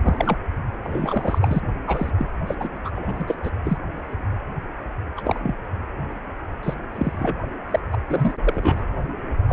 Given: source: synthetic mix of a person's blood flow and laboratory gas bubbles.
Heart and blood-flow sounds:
Doppler ultrasound of blood flow; precordium
0.03-0.38 s: bubbles
0.84-1.39 s: bubbles
1.41-1.61 s: bubbles
1.87-2.11 s: bubbles
2.18-2.27 s: bubbles
2.47-2.54 s: bubbles
2.60-2.70 s: bubbles
2.85-2.90 s: bubbles
2.95-3.25 s: bubbles
3.28-3.35 s: bubbles
3.43-3.50 s: bubbles
3.64-3.78 s: bubbles
5.17-5.21 s: bubbles
5.25-5.40 s: bubbles
5.43-5.54 s: bubbles
6.62-6.74 s: bubbles
6.91-7.46 s: bubbles
7.71-7.80 s: bubbles
7.92-7.98 s: bubbles
8.09-8.32 s: bubbles
8.45-8.87 s: bubbles
9.47-9.52 s: bubbles
From the record:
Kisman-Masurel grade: 232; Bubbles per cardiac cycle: several, 3 to 8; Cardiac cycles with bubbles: 50 to 99%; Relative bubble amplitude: moderate (0.250 to 0.450); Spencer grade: 3 (all of the cardiac periods contain showers or single bubble signals, but not dominating or overriding the cardiac motion signals); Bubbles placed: anywhere in the cardiac cycle

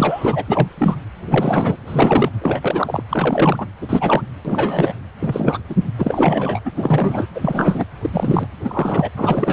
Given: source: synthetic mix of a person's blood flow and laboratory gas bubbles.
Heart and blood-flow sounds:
Doppler ultrasound of blood flow; precordium
0.00-0.44 s: bubbles
0.48-0.68 s: bubbles
0.77-0.96 s: bubbles
1.27-1.76 s: bubbles
1.86-2.30 s: bubbles
2.42-3.02 s: bubbles
3.09-3.67 s: bubbles
3.81-4.23 s: bubbles
4.45-4.92 s: bubbles
5.20-5.59 s: bubbles
5.69-5.75 s: bubbles
5.98-6.60 s: bubbles
6.65-6.71 s: bubbles
6.75-7.28 s: bubbles
7.35-7.84 s: bubbles
8.01-8.10 s: bubbles
8.12-8.47 s: bubbles
8.64-9.09 s: bubbles
9.15-9.53 s: bubbles
From the record:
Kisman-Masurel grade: 343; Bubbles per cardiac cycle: rolling drumbeat, 9 or more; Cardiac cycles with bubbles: 100%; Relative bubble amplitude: loud (0.450 to 0.775); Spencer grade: 3 (all of the cardiac periods contain showers or single bubble signals, but not dominating or overriding the cardiac motion signals); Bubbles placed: anywhere in the cardiac cycle

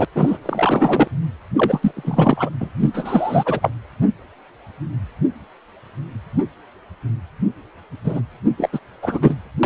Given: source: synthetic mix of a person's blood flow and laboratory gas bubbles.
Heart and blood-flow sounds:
Doppler ultrasound of blood flow; precordium
0.00-0.05 s: bubbles
0.15-0.38 s: bubbles
0.42-1.08 s: bubbles
1.56-2.49 s: bubbles
2.59-2.69 s: bubbles
2.79-3.70 s: bubbles
8.04-8.21 s: bubbles
8.58-8.69 s: bubbles
8.72-8.79 s: bubbles
9.02-9.34 s: bubbles
9.63-9.66 s: bubbles
From the record:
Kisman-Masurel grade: 333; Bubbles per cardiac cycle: rolling drumbeat, 9 or more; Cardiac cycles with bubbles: 50 to 99%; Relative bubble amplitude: loud (0.450 to 0.775); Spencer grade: 3 (all of the cardiac periods contain showers or single bubble signals, but not dominating or overriding the cardiac motion signals); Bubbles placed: anywhere in the cardiac cycle

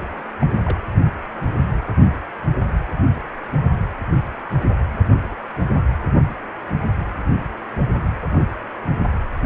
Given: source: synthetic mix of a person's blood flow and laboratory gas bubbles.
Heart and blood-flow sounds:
Doppler ultrasound of blood flow; precordium
0.40-0.47 s: bubbles
0.65-0.78 s: bubbles
From the record:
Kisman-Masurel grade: 121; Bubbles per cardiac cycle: 1 to 2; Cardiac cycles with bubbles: 10 to 50%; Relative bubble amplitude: barely perceptible (0.100 to 0.250); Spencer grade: 2 (many but less than half of the cardiac periods contain bubble signals, singularly or in groups); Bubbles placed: only in the low amplitude regions of the cardiac cycle

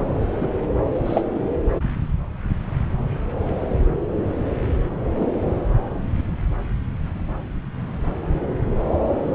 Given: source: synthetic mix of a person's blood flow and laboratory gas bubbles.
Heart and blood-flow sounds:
Doppler ultrasound of blood flow; subclavian vein
0.40-0.48 s: bubbles
1.05-1.21 s: bubbles
5.20-5.26 s: bubbles
From the record:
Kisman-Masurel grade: 123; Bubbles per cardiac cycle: 1 to 2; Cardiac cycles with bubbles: 10 to 50%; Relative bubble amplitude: loud (0.450 to 0.775); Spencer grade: 2 (many but less than half of the cardiac periods contain bubble signals, singularly or in groups); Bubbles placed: anywhere in the cardiac cycle

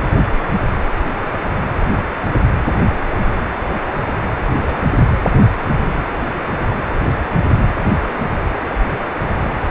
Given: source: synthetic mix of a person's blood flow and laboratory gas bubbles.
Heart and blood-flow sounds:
Doppler ultrasound of blood flow; precordium
4.61-4.79 s: bubbles
From the record:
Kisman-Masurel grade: 111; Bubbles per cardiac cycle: 1 to 2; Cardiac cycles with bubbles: 1 to 10%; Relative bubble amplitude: barely perceptible (0.100 to 0.250); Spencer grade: 1 (occasional bubble signal discernible with the cardiac motion signal, with majority of cardiac periods free of bubbles); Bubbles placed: anywhere in the cardiac cycle

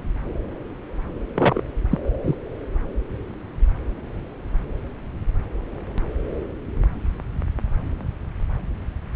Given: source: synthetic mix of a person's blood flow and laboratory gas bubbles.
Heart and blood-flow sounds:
Doppler ultrasound of blood flow; subclavian vein
1.34-1.61 s: bubbles
1.91-1.99 s: bubbles
2.24-2.35 s: bubbles
From the record:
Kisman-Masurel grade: 122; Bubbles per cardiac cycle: 1 to 2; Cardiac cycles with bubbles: 10 to 50%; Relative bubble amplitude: moderate (0.250 to 0.450); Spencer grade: 2 (many but less than half of the cardiac periods contain bubble signals, singularly or in groups); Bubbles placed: anywhere in the cardiac cycle

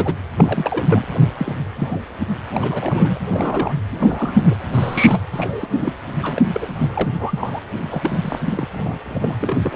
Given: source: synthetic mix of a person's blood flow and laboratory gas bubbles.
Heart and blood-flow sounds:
Doppler ultrasound of blood flow; precordium
0.00-0.15 s: bubbles
0.36-1.04 s: bubbles
1.37-1.52 s: bubbles
1.71-2.02 s: bubbles
2.51-3.18 s: bubbles
3.29-3.73 s: bubbles
3.94-4.55 s: bubbles
4.72-5.20 s: bubbles
5.32-5.67 s: bubbles
5.71-5.92 s: bubbles
6.21-6.90 s: bubbles
6.93-7.08 s: bubbles
7.19-7.61 s: bubbles
7.91-8.38 s: bubbles
8.46-8.66 s: bubbles
8.73-8.99 s: bubbles
9.04-9.37 s: bubbles
9.41-9.58 s: bubbles
9.60-9.76 s: bubbles
From the record:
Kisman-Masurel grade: 242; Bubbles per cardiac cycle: several, 3 to 8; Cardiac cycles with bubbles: 100%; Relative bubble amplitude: moderate (0.250 to 0.450); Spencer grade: 3 (all of the cardiac periods contain showers or single bubble signals, but not dominating or overriding the cardiac motion signals); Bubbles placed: anywhere in the cardiac cycle

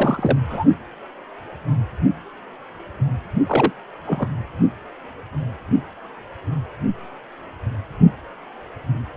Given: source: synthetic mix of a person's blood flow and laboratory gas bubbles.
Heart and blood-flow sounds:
Doppler ultrasound of blood flow; precordium
0.00-0.38 s: bubbles
0.49-0.65 s: bubbles
3.48-3.73 s: bubbles
4.06-4.27 s: bubbles
From the record:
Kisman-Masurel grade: 222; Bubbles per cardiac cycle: several, 3 to 8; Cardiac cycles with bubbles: 10 to 50%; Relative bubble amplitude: moderate (0.250 to 0.450); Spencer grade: 2 (many but less than half of the cardiac periods contain bubble signals, singularly or in groups); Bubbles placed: only in the low amplitude regions of the cardiac cycle

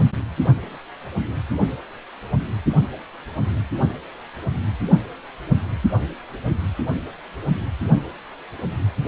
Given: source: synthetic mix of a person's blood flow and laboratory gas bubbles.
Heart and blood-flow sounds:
Doppler ultrasound of blood flow; precordium
9.06-9.08 s: bubbles
From the record:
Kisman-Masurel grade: 212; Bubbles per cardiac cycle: several, 3 to 8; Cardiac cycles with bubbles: 1 to 10%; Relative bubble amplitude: moderate (0.250 to 0.450); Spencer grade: 1 (occasional bubble signal discernible with the cardiac motion signal, with majority of cardiac periods free of bubbles); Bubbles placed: only in the low amplitude regions of the cardiac cycle

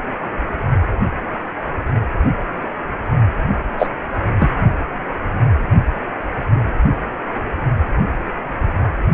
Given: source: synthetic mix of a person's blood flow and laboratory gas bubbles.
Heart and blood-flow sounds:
Doppler ultrasound of blood flow; precordium
3.79-3.87 s: bubbles
4.39-4.51 s: bubbles
From the record:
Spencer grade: 1 (occasional bubble signal discernible with the cardiac motion signal, with majority of cardiac periods free of bubbles); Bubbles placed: only in the low amplitude regions of the cardiac cycle

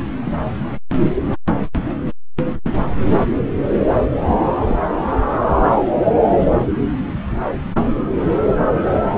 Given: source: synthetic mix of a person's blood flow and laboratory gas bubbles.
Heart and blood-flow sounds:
Doppler ultrasound of blood flow; subclavian vein
0.24-0.32 s: bubbles
4.67-4.83 s: bubbles
From the record:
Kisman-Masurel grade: 121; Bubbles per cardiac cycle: 1 to 2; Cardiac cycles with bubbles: 10 to 50%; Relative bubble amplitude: barely perceptible (0.100 to 0.250); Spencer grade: 2 (many but less than half of the cardiac periods contain bubble signals, singularly or in groups); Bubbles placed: anywhere in the cardiac cycle

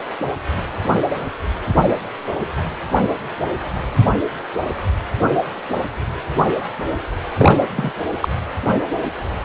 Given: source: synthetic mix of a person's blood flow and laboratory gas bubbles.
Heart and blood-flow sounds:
Doppler ultrasound of blood flow; precordium
7.38-7.57 s: bubbles
7.76-7.93 s: bubbles
8.21-8.28 s: bubbles
From the record:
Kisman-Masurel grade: 212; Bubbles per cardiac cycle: several, 3 to 8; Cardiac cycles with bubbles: 1 to 10%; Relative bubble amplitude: moderate (0.250 to 0.450); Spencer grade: 1 (occasional bubble signal discernible with the cardiac motion signal, with majority of cardiac periods free of bubbles); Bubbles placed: anywhere in the cardiac cycle

